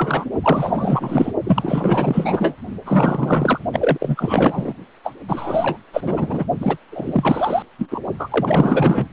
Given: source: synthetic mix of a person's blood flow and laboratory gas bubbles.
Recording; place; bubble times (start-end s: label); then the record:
Doppler ultrasound of blood flow; precordium
0.00-0.24 s: bubbles
0.42-1.32 s: bubbles
1.45-2.56 s: bubbles
2.85-3.60 s: bubbles
3.73-4.73 s: bubbles
5.03-5.13 s: bubbles
5.28-5.78 s: bubbles
5.93-6.45 s: bubbles
6.60-6.78 s: bubbles
6.91-7.62 s: bubbles
7.79-8.00 s: bubbles
8.19-9.05 s: bubbles
From the record:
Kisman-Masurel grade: 444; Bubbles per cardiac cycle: continuous sound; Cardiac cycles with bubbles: 100%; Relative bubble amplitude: maximal (0.775 to 0.999); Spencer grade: 4 (maximum detectable bubble signal sounding continuously throughout systole and diastole of every cardiac period, and overriding the amplitude of the normal cardiac signals); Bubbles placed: only in the low amplitude regions of the cardiac cycle